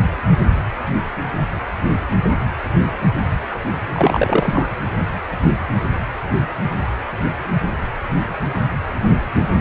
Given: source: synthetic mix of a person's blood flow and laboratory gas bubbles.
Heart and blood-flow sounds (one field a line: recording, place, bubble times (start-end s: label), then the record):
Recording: Doppler ultrasound of blood flow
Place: precordium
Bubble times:
3.92-4.68 s: bubbles
From the record:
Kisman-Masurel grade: 212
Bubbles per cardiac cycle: several, 3 to 8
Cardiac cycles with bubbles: 1 to 10%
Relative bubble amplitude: moderate (0.250 to 0.450)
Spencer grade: 1 (occasional bubble signal discernible with the cardiac motion signal, with majority of cardiac periods free of bubbles)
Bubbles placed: anywhere in the cardiac cycle